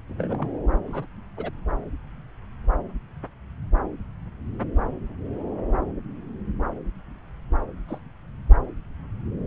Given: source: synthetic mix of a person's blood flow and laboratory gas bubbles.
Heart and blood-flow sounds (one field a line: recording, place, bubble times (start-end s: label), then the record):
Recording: Doppler ultrasound of blood flow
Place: subclavian vein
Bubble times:
0.09-0.47 s: bubbles
0.87-1.06 s: bubbles
1.37-1.50 s: bubbles
7.88-7.99 s: bubbles
From the record:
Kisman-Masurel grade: 121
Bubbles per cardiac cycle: 1 to 2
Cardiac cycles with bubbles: 10 to 50%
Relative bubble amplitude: barely perceptible (0.100 to 0.250)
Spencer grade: 2 (many but less than half of the cardiac periods contain bubble signals, singularly or in groups)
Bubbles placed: anywhere in the cardiac cycle